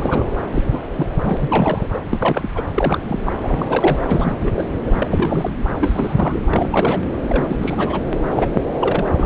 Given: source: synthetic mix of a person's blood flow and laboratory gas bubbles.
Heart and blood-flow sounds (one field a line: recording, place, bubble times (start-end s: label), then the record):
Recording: Doppler ultrasound of blood flow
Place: subclavian vein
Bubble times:
0.00-0.32 s: bubbles
0.52-0.63 s: bubbles
0.71-0.80 s: bubbles
0.96-1.06 s: bubbles
1.23-1.88 s: bubbles
1.93-1.98 s: bubbles
2.10-2.50 s: bubbles
2.55-2.67 s: bubbles
2.74-2.98 s: bubbles
3.04-3.21 s: bubbles
3.26-3.33 s: bubbles
3.42-3.97 s: bubbles
4.07-4.36 s: bubbles
4.40-4.52 s: bubbles
4.54-4.64 s: bubbles
4.87-4.91 s: bubbles
4.97-5.55 s: bubbles
5.81-6.39 s: bubbles
6.51-7.12 s: bubbles
7.28-8.01 s: bubbles
8.30-8.62 s: bubbles
8.80-9.12 s: bubbles
9.17-9.26 s: bubbles
From the record:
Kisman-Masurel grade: 342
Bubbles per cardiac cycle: rolling drumbeat, 9 or more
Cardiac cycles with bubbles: 100%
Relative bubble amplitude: moderate (0.250 to 0.450)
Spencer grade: 3 (all of the cardiac periods contain showers or single bubble signals, but not dominating or overriding the cardiac motion signals)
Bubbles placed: anywhere in the cardiac cycle